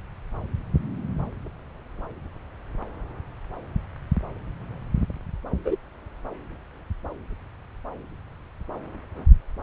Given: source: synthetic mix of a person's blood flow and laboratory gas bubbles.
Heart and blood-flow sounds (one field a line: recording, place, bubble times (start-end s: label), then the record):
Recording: Doppler ultrasound of blood flow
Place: subclavian vein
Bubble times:
5.64-5.76 s: bubbles
From the record:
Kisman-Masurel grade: 112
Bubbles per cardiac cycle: 1 to 2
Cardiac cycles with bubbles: 1 to 10%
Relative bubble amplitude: moderate (0.250 to 0.450)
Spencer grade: 1 (occasional bubble signal discernible with the cardiac motion signal, with majority of cardiac periods free of bubbles)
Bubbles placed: anywhere in the cardiac cycle